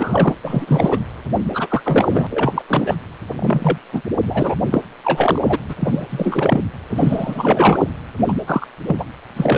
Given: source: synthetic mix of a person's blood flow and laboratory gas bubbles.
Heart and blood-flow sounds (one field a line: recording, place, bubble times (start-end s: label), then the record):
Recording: Doppler ultrasound of blood flow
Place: precordium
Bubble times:
0.00-0.33 s: bubbles
0.44-0.98 s: bubbles
1.54-1.82 s: bubbles
1.85-2.27 s: bubbles
2.30-2.62 s: bubbles
2.67-2.94 s: bubbles
3.36-3.78 s: bubbles
3.92-4.01 s: bubbles
4.26-4.55 s: bubbles
4.69-4.82 s: bubbles
5.04-5.42 s: bubbles
5.45-5.58 s: bubbles
5.68-5.74 s: bubbles
5.80-6.06 s: bubbles
6.09-6.62 s: bubbles
6.88-7.84 s: bubbles
8.18-8.33 s: bubbles
8.47-8.66 s: bubbles
8.88-9.06 s: bubbles
9.36-9.58 s: bubbles
From the record:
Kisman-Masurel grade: 342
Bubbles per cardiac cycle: rolling drumbeat, 9 or more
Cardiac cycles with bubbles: 100%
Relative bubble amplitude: moderate (0.250 to 0.450)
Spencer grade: 3 (all of the cardiac periods contain showers or single bubble signals, but not dominating or overriding the cardiac motion signals)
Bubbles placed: anywhere in the cardiac cycle